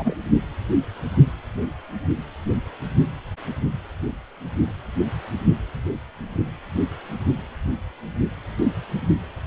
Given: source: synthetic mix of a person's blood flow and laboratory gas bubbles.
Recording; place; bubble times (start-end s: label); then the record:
Doppler ultrasound of blood flow; precordium
0.00-0.15 s: bubbles
From the record:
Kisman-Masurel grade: 112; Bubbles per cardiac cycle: 1 to 2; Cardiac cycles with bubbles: 1 to 10%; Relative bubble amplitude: moderate (0.250 to 0.450); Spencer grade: 1 (occasional bubble signal discernible with the cardiac motion signal, with majority of cardiac periods free of bubbles); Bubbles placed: anywhere in the cardiac cycle